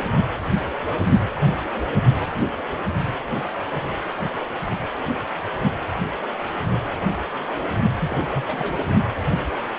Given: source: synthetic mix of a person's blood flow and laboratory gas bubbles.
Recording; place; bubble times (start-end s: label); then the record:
Doppler ultrasound of blood flow; precordium
8.00-8.44 s: bubbles
8.47-8.83 s: bubbles
From the record:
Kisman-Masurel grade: 211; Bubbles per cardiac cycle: several, 3 to 8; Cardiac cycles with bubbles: 1 to 10%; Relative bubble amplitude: barely perceptible (0.100 to 0.250); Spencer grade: 1 (occasional bubble signal discernible with the cardiac motion signal, with majority of cardiac periods free of bubbles); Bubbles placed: anywhere in the cardiac cycle